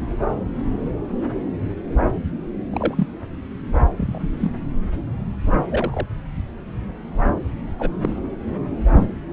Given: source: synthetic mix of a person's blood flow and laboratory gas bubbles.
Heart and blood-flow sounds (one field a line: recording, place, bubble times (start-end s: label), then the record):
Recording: Doppler ultrasound of blood flow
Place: subclavian vein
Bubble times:
2.70-3.07 s: bubbles
3.97-4.31 s: bubbles
4.41-4.51 s: bubbles
5.69-6.07 s: bubbles
7.79-7.92 s: bubbles
8.01-8.17 s: bubbles
8.96-9.07 s: bubbles
From the record:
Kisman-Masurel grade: 122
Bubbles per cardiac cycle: 1 to 2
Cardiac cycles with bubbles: 10 to 50%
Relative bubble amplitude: moderate (0.250 to 0.450)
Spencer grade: 2 (many but less than half of the cardiac periods contain bubble signals, singularly or in groups)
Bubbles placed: anywhere in the cardiac cycle